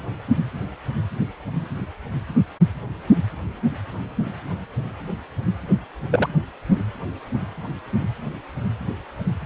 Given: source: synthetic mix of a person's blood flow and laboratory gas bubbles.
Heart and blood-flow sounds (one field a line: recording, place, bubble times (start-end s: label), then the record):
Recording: Doppler ultrasound of blood flow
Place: precordium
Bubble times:
6.11-6.27 s: bubbles
From the record:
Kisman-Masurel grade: 112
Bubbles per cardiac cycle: 1 to 2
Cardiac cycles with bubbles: 1 to 10%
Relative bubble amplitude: moderate (0.250 to 0.450)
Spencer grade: 1 (occasional bubble signal discernible with the cardiac motion signal, with majority of cardiac periods free of bubbles)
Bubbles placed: only in the low amplitude regions of the cardiac cycle